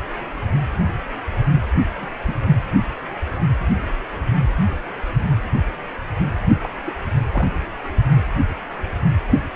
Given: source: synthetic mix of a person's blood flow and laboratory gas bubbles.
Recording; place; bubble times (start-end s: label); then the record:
Doppler ultrasound of blood flow; precordium
2.01-2.06 s: bubbles
2.26-2.35 s: bubbles
6.62-6.70 s: bubbles
6.86-6.94 s: bubbles
7.33-7.48 s: bubbles
From the record:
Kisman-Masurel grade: 121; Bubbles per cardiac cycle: 1 to 2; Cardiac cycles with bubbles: 10 to 50%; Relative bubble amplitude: barely perceptible (0.100 to 0.250); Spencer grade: 2 (many but less than half of the cardiac periods contain bubble signals, singularly or in groups); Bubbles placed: anywhere in the cardiac cycle